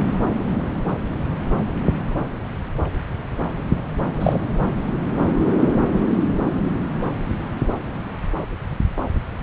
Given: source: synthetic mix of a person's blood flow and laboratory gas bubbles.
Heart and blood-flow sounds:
Doppler ultrasound of blood flow; subclavian vein
4.20-4.38 s: bubbles
From the record:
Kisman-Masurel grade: 112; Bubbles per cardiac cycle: 1 to 2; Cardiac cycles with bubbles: 1 to 10%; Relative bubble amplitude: moderate (0.250 to 0.450); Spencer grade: 1 (occasional bubble signal discernible with the cardiac motion signal, with majority of cardiac periods free of bubbles); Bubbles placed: anywhere in the cardiac cycle

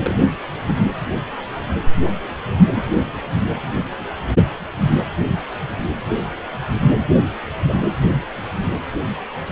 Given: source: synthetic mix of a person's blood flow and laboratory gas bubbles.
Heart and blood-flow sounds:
Doppler ultrasound of blood flow; precordium
0.06-0.17 s: bubbles
0.67-0.74 s: bubbles
7.68-7.74 s: bubbles
From the record:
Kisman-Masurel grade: 121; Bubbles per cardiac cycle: 1 to 2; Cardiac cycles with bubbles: 10 to 50%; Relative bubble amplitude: barely perceptible (0.100 to 0.250); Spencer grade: 2 (many but less than half of the cardiac periods contain bubble signals, singularly or in groups); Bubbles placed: anywhere in the cardiac cycle

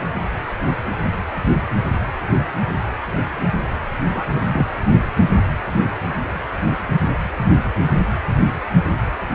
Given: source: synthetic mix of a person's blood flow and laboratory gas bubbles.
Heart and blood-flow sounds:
Doppler ultrasound of blood flow; precordium
4.14-4.25 s: bubbles
4.33-4.42 s: bubbles
4.53-4.66 s: bubbles
From the record:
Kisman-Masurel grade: 212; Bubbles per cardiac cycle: several, 3 to 8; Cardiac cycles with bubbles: 1 to 10%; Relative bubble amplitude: moderate (0.250 to 0.450); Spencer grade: 1 (occasional bubble signal discernible with the cardiac motion signal, with majority of cardiac periods free of bubbles); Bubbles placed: anywhere in the cardiac cycle

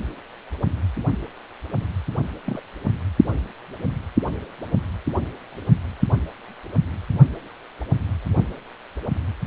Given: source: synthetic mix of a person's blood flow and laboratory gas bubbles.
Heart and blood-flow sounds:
Doppler ultrasound of blood flow; precordium
2.46-2.62 s: bubbles
From the record:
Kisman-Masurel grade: 111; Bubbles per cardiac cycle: 1 to 2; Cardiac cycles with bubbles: 1 to 10%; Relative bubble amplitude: barely perceptible (0.100 to 0.250); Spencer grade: 1 (occasional bubble signal discernible with the cardiac motion signal, with majority of cardiac periods free of bubbles); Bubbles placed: only in the low amplitude regions of the cardiac cycle

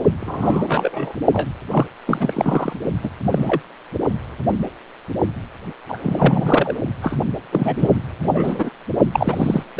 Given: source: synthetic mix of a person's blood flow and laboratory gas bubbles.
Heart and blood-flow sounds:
Doppler ultrasound of blood flow; precordium
0.21-1.16 s: bubbles
1.32-1.49 s: bubbles
1.71-1.86 s: bubbles
2.06-2.73 s: bubbles
3.03-3.10 s: bubbles
3.31-3.61 s: bubbles
5.89-5.99 s: bubbles
6.02-6.77 s: bubbles
7.02-7.17 s: bubbles
7.52-7.90 s: bubbles
8.21-8.70 s: bubbles
9.13-9.63 s: bubbles
9.76-9.80 s: bubbles
From the record:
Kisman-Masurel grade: 232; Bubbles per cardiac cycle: several, 3 to 8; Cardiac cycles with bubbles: 50 to 99%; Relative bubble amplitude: moderate (0.250 to 0.450); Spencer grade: 3 (all of the cardiac periods contain showers or single bubble signals, but not dominating or overriding the cardiac motion signals); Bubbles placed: only in the low amplitude regions of the cardiac cycle

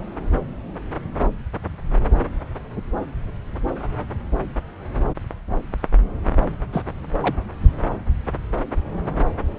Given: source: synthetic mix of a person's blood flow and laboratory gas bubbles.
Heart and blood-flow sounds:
Doppler ultrasound of blood flow; subclavian vein
6.72-6.83 s: bubbles
7.21-7.35 s: bubbles
From the record:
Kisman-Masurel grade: 112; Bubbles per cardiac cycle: 1 to 2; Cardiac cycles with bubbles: 1 to 10%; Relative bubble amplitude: moderate (0.250 to 0.450); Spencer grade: 1 (occasional bubble signal discernible with the cardiac motion signal, with majority of cardiac periods free of bubbles); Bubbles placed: anywhere in the cardiac cycle

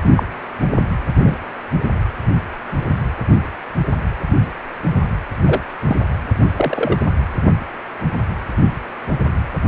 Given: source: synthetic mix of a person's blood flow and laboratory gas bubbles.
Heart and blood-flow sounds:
Doppler ultrasound of blood flow; precordium
0.16-0.23 s: bubbles
1.16-1.35 s: bubbles
5.46-5.61 s: bubbles
5.87-5.96 s: bubbles
6.57-6.97 s: bubbles
From the record:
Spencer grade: 2 (many but less than half of the cardiac periods contain bubble signals, singularly or in groups); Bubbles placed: anywhere in the cardiac cycle

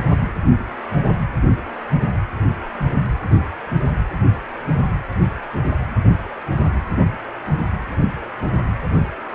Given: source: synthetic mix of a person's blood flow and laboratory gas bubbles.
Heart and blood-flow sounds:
Doppler ultrasound of blood flow; precordium
no bubbles
From the record:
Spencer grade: 0 (complete lack of bubble signals)

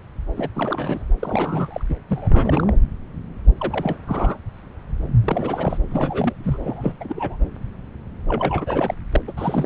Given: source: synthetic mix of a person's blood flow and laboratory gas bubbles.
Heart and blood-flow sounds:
Doppler ultrasound of blood flow; subclavian vein
0.37-0.49 s: bubbles
0.55-1.05 s: bubbles
1.20-1.84 s: bubbles
1.89-1.95 s: bubbles
2.08-2.73 s: bubbles
3.60-3.96 s: bubbles
4.07-4.38 s: bubbles
5.25-5.78 s: bubbles
5.90-6.58 s: bubbles
6.62-6.94 s: bubbles
7.00-7.37 s: bubbles
8.28-8.95 s: bubbles
9.12-9.21 s: bubbles
9.28-9.33 s: bubbles
9.37-9.66 s: bubbles
From the record:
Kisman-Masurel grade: 332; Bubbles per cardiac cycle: rolling drumbeat, 9 or more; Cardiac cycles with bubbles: 50 to 99%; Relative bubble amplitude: moderate (0.250 to 0.450); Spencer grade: 3 (all of the cardiac periods contain showers or single bubble signals, but not dominating or overriding the cardiac motion signals); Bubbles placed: anywhere in the cardiac cycle

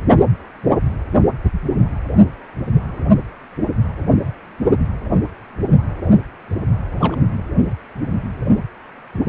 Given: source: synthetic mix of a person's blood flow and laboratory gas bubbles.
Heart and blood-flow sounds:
Doppler ultrasound of blood flow; precordium
6.99-7.15 s: bubbles
From the record:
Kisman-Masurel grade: 111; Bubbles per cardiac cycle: 1 to 2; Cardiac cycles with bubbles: 1 to 10%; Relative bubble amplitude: barely perceptible (0.100 to 0.250); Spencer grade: 1 (occasional bubble signal discernible with the cardiac motion signal, with majority of cardiac periods free of bubbles); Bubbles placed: only in the low amplitude regions of the cardiac cycle

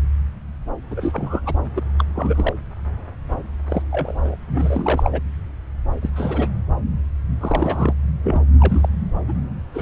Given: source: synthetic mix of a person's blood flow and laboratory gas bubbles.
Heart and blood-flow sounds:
Doppler ultrasound of blood flow; subclavian vein
0.90-1.40 s: bubbles
1.45-1.53 s: bubbles
1.75-1.81 s: bubbles
1.98-2.04 s: bubbles
2.15-2.54 s: bubbles
3.69-3.82 s: bubbles
3.91-4.36 s: bubbles
4.47-5.21 s: bubbles
6.02-6.09 s: bubbles
6.15-6.48 s: bubbles
7.40-7.93 s: bubbles
8.24-8.43 s: bubbles
8.60-8.88 s: bubbles
9.28-9.33 s: bubbles
9.74-9.82 s: bubbles
From the record:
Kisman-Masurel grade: 232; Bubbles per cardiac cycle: several, 3 to 8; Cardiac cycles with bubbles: 50 to 99%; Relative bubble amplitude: moderate (0.250 to 0.450); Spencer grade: 3 (all of the cardiac periods contain showers or single bubble signals, but not dominating or overriding the cardiac motion signals); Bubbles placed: anywhere in the cardiac cycle

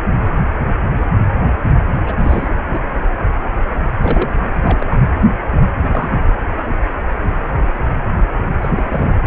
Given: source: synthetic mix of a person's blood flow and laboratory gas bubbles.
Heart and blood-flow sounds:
Doppler ultrasound of blood flow; precordium
2.06-2.15 s: bubbles
2.19-2.48 s: bubbles
2.73-2.80 s: bubbles
4.02-4.31 s: bubbles
4.63-4.86 s: bubbles
4.90-4.96 s: bubbles
5.79-6.17 s: bubbles
8.61-8.72 s: bubbles
8.74-9.10 s: bubbles
From the record:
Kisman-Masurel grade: 222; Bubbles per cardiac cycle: several, 3 to 8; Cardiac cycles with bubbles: 10 to 50%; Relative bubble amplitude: moderate (0.250 to 0.450); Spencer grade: 2 (many but less than half of the cardiac periods contain bubble signals, singularly or in groups); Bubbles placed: anywhere in the cardiac cycle

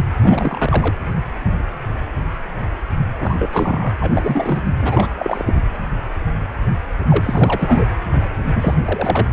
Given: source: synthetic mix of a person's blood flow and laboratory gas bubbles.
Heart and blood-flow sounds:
Doppler ultrasound of blood flow; precordium
0.20-0.96 s: bubbles
3.20-3.50 s: bubbles
3.53-3.92 s: bubbles
4.00-4.67 s: bubbles
4.82-5.09 s: bubbles
5.16-5.60 s: bubbles
7.08-7.85 s: bubbles
8.54-8.74 s: bubbles
8.85-9.28 s: bubbles
From the record:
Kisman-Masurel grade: 332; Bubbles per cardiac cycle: rolling drumbeat, 9 or more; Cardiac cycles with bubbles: 50 to 99%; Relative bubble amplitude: moderate (0.250 to 0.450); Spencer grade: 3 (all of the cardiac periods contain showers or single bubble signals, but not dominating or overriding the cardiac motion signals); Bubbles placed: anywhere in the cardiac cycle

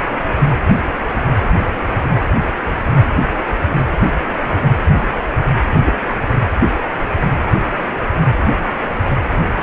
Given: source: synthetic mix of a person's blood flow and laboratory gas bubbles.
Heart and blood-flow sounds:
Doppler ultrasound of blood flow; precordium
5.85-5.92 s: bubbles
From the record:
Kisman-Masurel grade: 113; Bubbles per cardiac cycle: 1 to 2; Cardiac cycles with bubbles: 1 to 10%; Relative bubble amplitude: loud (0.450 to 0.775); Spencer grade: 1 (occasional bubble signal discernible with the cardiac motion signal, with majority of cardiac periods free of bubbles); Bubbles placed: anywhere in the cardiac cycle

